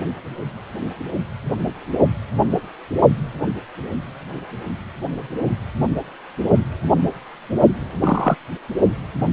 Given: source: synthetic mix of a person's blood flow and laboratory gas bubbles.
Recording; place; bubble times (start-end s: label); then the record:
Doppler ultrasound of blood flow; precordium
8.00-8.36 s: bubbles
From the record:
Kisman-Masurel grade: 223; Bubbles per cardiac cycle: several, 3 to 8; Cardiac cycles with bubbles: 10 to 50%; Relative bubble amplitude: loud (0.450 to 0.775); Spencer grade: 2 (many but less than half of the cardiac periods contain bubble signals, singularly or in groups); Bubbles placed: only in the low amplitude regions of the cardiac cycle